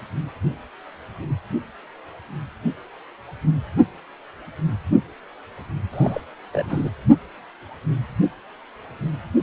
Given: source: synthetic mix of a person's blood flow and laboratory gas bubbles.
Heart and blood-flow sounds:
Doppler ultrasound of blood flow; precordium
5.92-6.21 s: bubbles
6.53-6.90 s: bubbles
From the record:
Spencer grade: 1 (occasional bubble signal discernible with the cardiac motion signal, with majority of cardiac periods free of bubbles); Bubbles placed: anywhere in the cardiac cycle

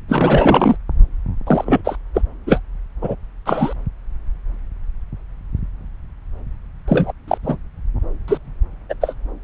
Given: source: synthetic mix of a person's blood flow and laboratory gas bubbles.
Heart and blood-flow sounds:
Doppler ultrasound of blood flow; subclavian vein
0.08-0.76 s: bubbles
1.46-1.81 s: bubbles
1.84-1.96 s: bubbles
2.14-2.22 s: bubbles
2.46-2.60 s: bubbles
3.01-3.15 s: bubbles
3.46-3.73 s: bubbles
6.88-7.12 s: bubbles
7.28-7.38 s: bubbles
7.43-7.57 s: bubbles
8.28-8.38 s: bubbles
8.89-8.94 s: bubbles
9.01-9.14 s: bubbles
From the record:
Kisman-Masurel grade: 233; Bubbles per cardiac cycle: several, 3 to 8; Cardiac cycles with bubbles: 50 to 99%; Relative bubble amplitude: loud (0.450 to 0.775); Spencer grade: 3 (all of the cardiac periods contain showers or single bubble signals, but not dominating or overriding the cardiac motion signals); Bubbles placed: anywhere in the cardiac cycle

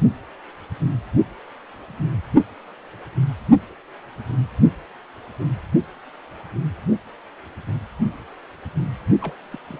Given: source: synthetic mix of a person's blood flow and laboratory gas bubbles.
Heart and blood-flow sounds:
Doppler ultrasound of blood flow; precordium
9.21-9.33 s: bubbles
9.51-9.59 s: bubbles
9.64-9.80 s: bubbles
From the record:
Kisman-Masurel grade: 211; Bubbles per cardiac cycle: several, 3 to 8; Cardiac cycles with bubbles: 1 to 10%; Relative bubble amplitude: barely perceptible (0.100 to 0.250); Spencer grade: 1 (occasional bubble signal discernible with the cardiac motion signal, with majority of cardiac periods free of bubbles); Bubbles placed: only in the low amplitude regions of the cardiac cycle

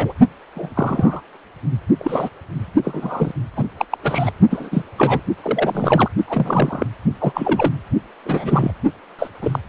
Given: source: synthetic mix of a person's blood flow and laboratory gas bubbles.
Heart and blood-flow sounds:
Doppler ultrasound of blood flow; precordium
0.00-0.14 s: bubbles
0.55-0.70 s: bubbles
0.75-1.21 s: bubbles
1.99-2.29 s: bubbles
2.84-3.31 s: bubbles
3.56-3.64 s: bubbles
3.77-3.85 s: bubbles
3.91-3.98 s: bubbles
4.03-4.32 s: bubbles
4.50-4.82 s: bubbles
4.98-5.21 s: bubbles
5.42-6.08 s: bubbles
6.27-6.87 s: bubbles
7.20-7.73 s: bubbles
8.25-8.72 s: bubbles
9.19-9.28 s: bubbles
9.41-9.59 s: bubbles
From the record:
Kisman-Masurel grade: 242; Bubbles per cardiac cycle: several, 3 to 8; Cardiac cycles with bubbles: 100%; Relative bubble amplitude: moderate (0.250 to 0.450); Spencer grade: 3 (all of the cardiac periods contain showers or single bubble signals, but not dominating or overriding the cardiac motion signals); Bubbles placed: only in the low amplitude regions of the cardiac cycle

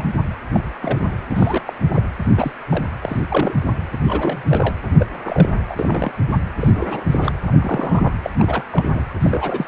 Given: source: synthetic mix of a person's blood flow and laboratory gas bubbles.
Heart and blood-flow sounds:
Doppler ultrasound of blood flow; precordium
0.00-0.04 s: bubbles
0.54-0.64 s: bubbles
0.82-1.07 s: bubbles
1.30-1.61 s: bubbles
1.66-1.73 s: bubbles
1.90-2.02 s: bubbles
2.37-2.52 s: bubbles
2.69-2.83 s: bubbles
3.02-3.19 s: bubbles
3.29-3.54 s: bubbles
3.65-3.77 s: bubbles
3.92-3.98 s: bubbles
4.00-4.43 s: bubbles
4.49-4.76 s: bubbles
4.97-5.07 s: bubbles
5.26-5.50 s: bubbles
5.66-6.12 s: bubbles
6.60-6.72 s: bubbles
6.76-7.06 s: bubbles
7.11-7.33 s: bubbles
7.47-7.52 s: bubbles
7.54-8.13 s: bubbles
8.22-8.30 s: bubbles
8.38-8.64 s: bubbles
8.71-9.03 s: bubbles
9.21-9.67 s: bubbles
From the record:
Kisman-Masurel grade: 242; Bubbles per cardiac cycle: several, 3 to 8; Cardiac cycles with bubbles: 100%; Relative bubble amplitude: moderate (0.250 to 0.450); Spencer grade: 3 (all of the cardiac periods contain showers or single bubble signals, but not dominating or overriding the cardiac motion signals); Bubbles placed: anywhere in the cardiac cycle

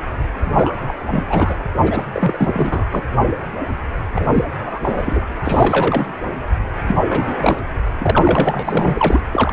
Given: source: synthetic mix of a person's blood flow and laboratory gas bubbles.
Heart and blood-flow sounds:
Doppler ultrasound of blood flow; precordium
0.42-0.94 s: bubbles
1.10-1.23 s: bubbles
1.29-1.55 s: bubbles
1.82-2.05 s: bubbles
2.13-2.87 s: bubbles
2.92-3.03 s: bubbles
4.15-4.28 s: bubbles
4.34-4.44 s: bubbles
4.65-4.79 s: bubbles
4.82-5.25 s: bubbles
5.45-6.13 s: bubbles
6.87-6.96 s: bubbles
7.08-7.62 s: bubbles
8.00-9.21 s: bubbles
9.32-9.53 s: bubbles
From the record:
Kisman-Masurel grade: 333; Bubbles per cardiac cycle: rolling drumbeat, 9 or more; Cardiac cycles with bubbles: 50 to 99%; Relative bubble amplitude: loud (0.450 to 0.775); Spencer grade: 3 (all of the cardiac periods contain showers or single bubble signals, but not dominating or overriding the cardiac motion signals); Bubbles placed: anywhere in the cardiac cycle

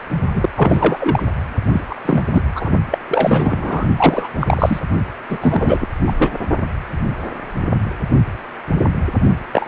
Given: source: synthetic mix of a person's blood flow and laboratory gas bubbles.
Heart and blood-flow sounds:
Doppler ultrasound of blood flow; precordium
0.34-0.49 s: bubbles
0.55-0.97 s: bubbles
1.00-1.23 s: bubbles
1.72-1.83 s: bubbles
1.90-1.95 s: bubbles
2.05-2.23 s: bubbles
2.33-2.42 s: bubbles
2.55-2.71 s: bubbles
2.91-2.98 s: bubbles
3.07-3.88 s: bubbles
3.96-4.29 s: bubbles
4.41-4.79 s: bubbles
5.29-5.87 s: bubbles
6.07-6.13 s: bubbles
6.17-6.30 s: bubbles
9.52-9.65 s: bubbles
From the record:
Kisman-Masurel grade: 333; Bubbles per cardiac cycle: rolling drumbeat, 9 or more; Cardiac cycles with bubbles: 50 to 99%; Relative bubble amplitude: loud (0.450 to 0.775); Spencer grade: 3 (all of the cardiac periods contain showers or single bubble signals, but not dominating or overriding the cardiac motion signals); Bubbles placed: only in the low amplitude regions of the cardiac cycle

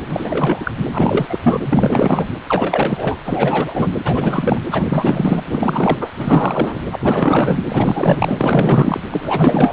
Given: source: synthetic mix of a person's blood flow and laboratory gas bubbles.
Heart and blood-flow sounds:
Doppler ultrasound of blood flow; precordium
0.06-0.72 s: bubbles
0.93-1.40 s: bubbles
1.44-1.58 s: bubbles
1.66-2.27 s: bubbles
2.46-3.18 s: bubbles
3.25-3.90 s: bubbles
4.04-4.61 s: bubbles
4.71-4.83 s: bubbles
4.89-5.44 s: bubbles
5.46-5.98 s: bubbles
6.00-6.09 s: bubbles
6.17-6.81 s: bubbles
6.92-7.58 s: bubbles
7.68-9.00 s: bubbles
9.10-9.72 s: bubbles
From the record:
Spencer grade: 4 (maximum detectable bubble signal sounding continuously throughout systole and diastole of every cardiac period, and overriding the amplitude of the normal cardiac signals); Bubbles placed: anywhere in the cardiac cycle

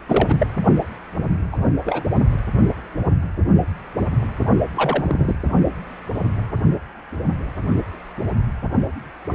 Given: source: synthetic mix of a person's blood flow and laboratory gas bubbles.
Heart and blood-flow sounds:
Doppler ultrasound of blood flow; precordium
0.08-0.47 s: bubbles
1.52-1.57 s: bubbles
1.84-2.04 s: bubbles
4.74-5.35 s: bubbles
From the record:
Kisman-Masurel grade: 222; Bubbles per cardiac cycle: several, 3 to 8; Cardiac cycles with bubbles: 10 to 50%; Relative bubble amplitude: moderate (0.250 to 0.450); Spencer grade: 2 (many but less than half of the cardiac periods contain bubble signals, singularly or in groups); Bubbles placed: only in the low amplitude regions of the cardiac cycle

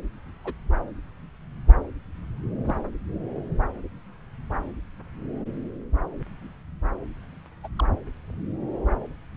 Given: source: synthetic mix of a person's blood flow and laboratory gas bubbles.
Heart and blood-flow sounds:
Doppler ultrasound of blood flow; subclavian vein
0.45-0.53 s: bubbles
2.66-2.75 s: bubbles
7.63-7.68 s: bubbles
7.79-7.85 s: bubbles
From the record:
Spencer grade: 2 (many but less than half of the cardiac periods contain bubble signals, singularly or in groups); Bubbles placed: anywhere in the cardiac cycle

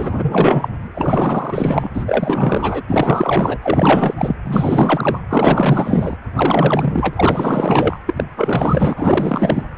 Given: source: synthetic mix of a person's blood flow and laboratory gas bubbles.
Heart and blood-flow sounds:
Doppler ultrasound of blood flow; precordium
0.00-0.68 s: bubbles
0.94-1.90 s: bubbles
1.94-2.83 s: bubbles
2.88-3.58 s: bubbles
3.62-4.35 s: bubbles
4.45-5.19 s: bubbles
5.29-6.16 s: bubbles
6.35-7.99 s: bubbles
8.06-8.24 s: bubbles
8.37-9.64 s: bubbles
From the record:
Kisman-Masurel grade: 444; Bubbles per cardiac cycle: continuous sound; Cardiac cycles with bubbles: 100%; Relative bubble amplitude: maximal (0.775 to 0.999); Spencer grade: 4 (maximum detectable bubble signal sounding continuously throughout systole and diastole of every cardiac period, and overriding the amplitude of the normal cardiac signals); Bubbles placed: anywhere in the cardiac cycle

